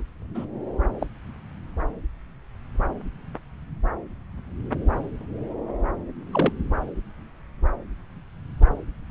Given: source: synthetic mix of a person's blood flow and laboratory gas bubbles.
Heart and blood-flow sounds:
Doppler ultrasound of blood flow; subclavian vein
0.34-0.45 s: bubbles
1.00-1.06 s: bubbles
6.32-6.53 s: bubbles
From the record:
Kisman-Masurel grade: 122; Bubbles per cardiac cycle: 1 to 2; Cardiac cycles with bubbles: 10 to 50%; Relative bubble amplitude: moderate (0.250 to 0.450); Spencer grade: 2 (many but less than half of the cardiac periods contain bubble signals, singularly or in groups); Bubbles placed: anywhere in the cardiac cycle

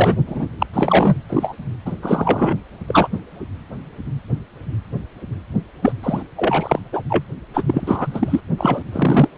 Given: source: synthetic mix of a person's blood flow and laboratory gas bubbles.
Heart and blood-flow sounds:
Doppler ultrasound of blood flow; precordium
0.00-0.17 s: bubbles
0.27-0.46 s: bubbles
0.58-0.66 s: bubbles
0.73-1.15 s: bubbles
1.29-1.55 s: bubbles
1.85-1.93 s: bubbles
2.02-2.56 s: bubbles
2.88-3.08 s: bubbles
5.82-5.92 s: bubbles
6.03-6.22 s: bubbles
6.37-6.80 s: bubbles
6.92-7.02 s: bubbles
7.09-7.24 s: bubbles
7.54-7.62 s: bubbles
7.67-8.40 s: bubbles
8.58-8.82 s: bubbles
8.92-9.29 s: bubbles
From the record:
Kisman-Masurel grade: 333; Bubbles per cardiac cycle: rolling drumbeat, 9 or more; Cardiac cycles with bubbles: 50 to 99%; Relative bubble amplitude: loud (0.450 to 0.775); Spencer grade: 3 (all of the cardiac periods contain showers or single bubble signals, but not dominating or overriding the cardiac motion signals); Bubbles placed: only in the low amplitude regions of the cardiac cycle

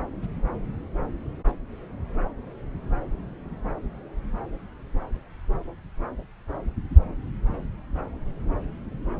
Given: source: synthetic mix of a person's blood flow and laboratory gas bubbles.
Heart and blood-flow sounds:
Doppler ultrasound of blood flow; subclavian vein
no bubbles
From the record:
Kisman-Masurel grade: 000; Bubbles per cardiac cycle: 0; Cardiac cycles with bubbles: 0%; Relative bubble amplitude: no bubbles discernible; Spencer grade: 0 (complete lack of bubble signals)

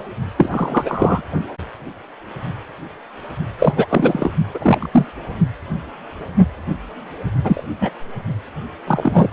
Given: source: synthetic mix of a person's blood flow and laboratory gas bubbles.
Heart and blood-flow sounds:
Doppler ultrasound of blood flow; precordium
0.38-1.22 s: bubbles
3.58-3.73 s: bubbles
3.76-4.32 s: bubbles
4.54-4.88 s: bubbles
4.92-5.06 s: bubbles
7.44-7.63 s: bubbles
7.80-7.90 s: bubbles
8.87-9.33 s: bubbles
From the record:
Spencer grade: 2 (many but less than half of the cardiac periods contain bubble signals, singularly or in groups); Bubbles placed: only in the low amplitude regions of the cardiac cycle

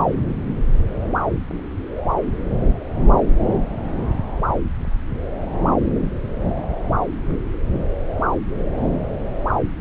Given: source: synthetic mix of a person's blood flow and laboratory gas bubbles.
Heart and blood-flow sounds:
Doppler ultrasound of blood flow; subclavian vein
no bubbles
From the record:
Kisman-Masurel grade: 000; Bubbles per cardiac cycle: 0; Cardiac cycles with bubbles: 0%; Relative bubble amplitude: no bubbles discernible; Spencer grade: 0 (complete lack of bubble signals)

